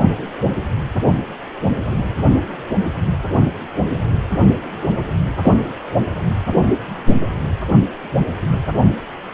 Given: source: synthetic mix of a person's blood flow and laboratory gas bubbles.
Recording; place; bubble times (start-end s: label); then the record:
Doppler ultrasound of blood flow; precordium
5.44-5.54 s: bubbles
From the record:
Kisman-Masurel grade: 113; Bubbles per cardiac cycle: 1 to 2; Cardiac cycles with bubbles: 1 to 10%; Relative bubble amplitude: loud (0.450 to 0.775); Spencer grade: 1 (occasional bubble signal discernible with the cardiac motion signal, with majority of cardiac periods free of bubbles); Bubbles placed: only in the low amplitude regions of the cardiac cycle